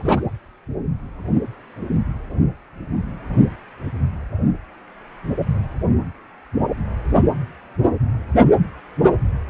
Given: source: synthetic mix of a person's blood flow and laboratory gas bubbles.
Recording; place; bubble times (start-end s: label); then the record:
Doppler ultrasound of blood flow; precordium
0.00-0.20 s: bubbles
From the record:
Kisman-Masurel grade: 212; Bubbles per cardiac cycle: several, 3 to 8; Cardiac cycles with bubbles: 1 to 10%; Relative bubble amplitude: moderate (0.250 to 0.450); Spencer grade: 1 (occasional bubble signal discernible with the cardiac motion signal, with majority of cardiac periods free of bubbles); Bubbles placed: anywhere in the cardiac cycle